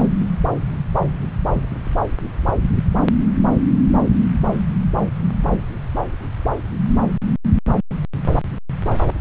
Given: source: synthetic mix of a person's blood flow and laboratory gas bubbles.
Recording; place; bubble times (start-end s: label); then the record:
Doppler ultrasound of blood flow; subclavian vein
no bubbles
From the record:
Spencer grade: 0 (complete lack of bubble signals)